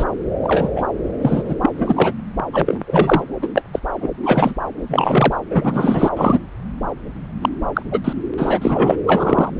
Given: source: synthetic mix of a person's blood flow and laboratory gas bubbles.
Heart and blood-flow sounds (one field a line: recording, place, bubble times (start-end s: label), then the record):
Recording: Doppler ultrasound of blood flow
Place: subclavian vein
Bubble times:
0.00-0.04 s: bubbles
0.43-0.69 s: bubbles
0.76-0.85 s: bubbles
1.21-1.54 s: bubbles
1.61-1.69 s: bubbles
1.78-2.13 s: bubbles
2.53-2.79 s: bubbles
2.87-3.23 s: bubbles
3.42-3.48 s: bubbles
3.54-3.62 s: bubbles
3.73-3.79 s: bubbles
4.01-4.08 s: bubbles
4.23-4.54 s: bubbles
4.88-5.36 s: bubbles
5.51-6.10 s: bubbles
6.17-6.39 s: bubbles
7.42-7.49 s: bubbles
7.74-7.83 s: bubbles
7.91-8.00 s: bubbles
8.04-8.13 s: bubbles
8.38-8.96 s: bubbles
9.06-9.50 s: bubbles
From the record:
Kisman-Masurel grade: 243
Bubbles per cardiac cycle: several, 3 to 8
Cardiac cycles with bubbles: 100%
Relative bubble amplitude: loud (0.450 to 0.775)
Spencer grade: 3 (all of the cardiac periods contain showers or single bubble signals, but not dominating or overriding the cardiac motion signals)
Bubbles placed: anywhere in the cardiac cycle